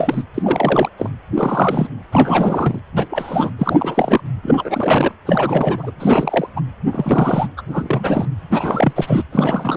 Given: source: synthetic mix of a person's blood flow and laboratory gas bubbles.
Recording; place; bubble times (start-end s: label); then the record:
Doppler ultrasound of blood flow; precordium
0.00-0.23 s: bubbles
0.34-0.90 s: bubbles
0.97-1.10 s: bubbles
1.34-1.87 s: bubbles
2.12-2.79 s: bubbles
2.96-3.06 s: bubbles
3.10-3.51 s: bubbles
3.58-4.21 s: bubbles
4.42-5.12 s: bubbles
5.26-5.91 s: bubbles
6.00-6.48 s: bubbles
6.56-6.62 s: bubbles
6.92-7.49 s: bubbles
7.57-7.62 s: bubbles
7.68-8.26 s: bubbles
8.51-9.24 s: bubbles
9.32-9.77 s: bubbles
From the record:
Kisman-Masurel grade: 343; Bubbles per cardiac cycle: rolling drumbeat, 9 or more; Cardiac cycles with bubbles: 100%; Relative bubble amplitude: loud (0.450 to 0.775); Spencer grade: 3 (all of the cardiac periods contain showers or single bubble signals, but not dominating or overriding the cardiac motion signals); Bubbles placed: anywhere in the cardiac cycle